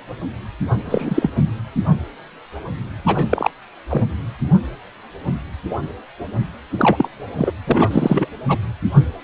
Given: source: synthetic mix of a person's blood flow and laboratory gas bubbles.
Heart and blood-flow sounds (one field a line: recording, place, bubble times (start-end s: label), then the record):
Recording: Doppler ultrasound of blood flow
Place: precordium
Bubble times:
0.85-1.30 s: bubbles
1.34-1.44 s: bubbles
3.06-3.26 s: bubbles
3.29-3.50 s: bubbles
3.89-4.04 s: bubbles
6.78-7.08 s: bubbles
7.37-7.52 s: bubbles
7.67-8.29 s: bubbles
8.48-8.58 s: bubbles
From the record:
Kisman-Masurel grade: 223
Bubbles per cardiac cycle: several, 3 to 8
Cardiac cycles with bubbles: 10 to 50%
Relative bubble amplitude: loud (0.450 to 0.775)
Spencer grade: 2 (many but less than half of the cardiac periods contain bubble signals, singularly or in groups)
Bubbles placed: anywhere in the cardiac cycle